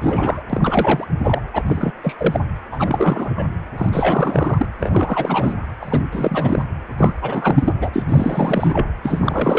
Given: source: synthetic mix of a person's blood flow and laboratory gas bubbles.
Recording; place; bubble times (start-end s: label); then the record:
Doppler ultrasound of blood flow; precordium
0.01-1.06 s: bubbles
1.23-1.42 s: bubbles
1.54-1.62 s: bubbles
1.67-1.92 s: bubbles
2.03-2.15 s: bubbles
2.17-2.40 s: bubbles
2.71-3.45 s: bubbles
3.77-3.89 s: bubbles
3.92-4.66 s: bubbles
4.81-5.54 s: bubbles
5.81-6.03 s: bubbles
6.12-6.64 s: bubbles
6.97-7.14 s: bubbles
7.22-7.74 s: bubbles
7.81-7.91 s: bubbles
7.93-8.03 s: bubbles
8.08-8.88 s: bubbles
9.02-9.59 s: bubbles
From the record:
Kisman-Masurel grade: 343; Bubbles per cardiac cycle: rolling drumbeat, 9 or more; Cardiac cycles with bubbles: 100%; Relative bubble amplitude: loud (0.450 to 0.775); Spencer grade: 3 (all of the cardiac periods contain showers or single bubble signals, but not dominating or overriding the cardiac motion signals); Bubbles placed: anywhere in the cardiac cycle